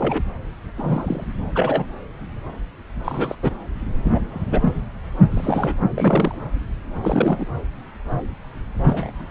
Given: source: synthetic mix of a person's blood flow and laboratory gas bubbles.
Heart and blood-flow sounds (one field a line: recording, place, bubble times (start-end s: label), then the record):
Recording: Doppler ultrasound of blood flow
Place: subclavian vein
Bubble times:
0.00-0.23 s: bubbles
0.77-1.27 s: bubbles
1.55-1.85 s: bubbles
3.04-3.35 s: bubbles
3.43-3.52 s: bubbles
4.04-4.19 s: bubbles
4.30-4.73 s: bubbles
5.31-5.75 s: bubbles
5.96-6.38 s: bubbles
7.02-7.46 s: bubbles
8.83-9.26 s: bubbles
From the record:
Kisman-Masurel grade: 232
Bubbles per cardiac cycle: several, 3 to 8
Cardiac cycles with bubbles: 50 to 99%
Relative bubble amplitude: moderate (0.250 to 0.450)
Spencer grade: 3 (all of the cardiac periods contain showers or single bubble signals, but not dominating or overriding the cardiac motion signals)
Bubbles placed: anywhere in the cardiac cycle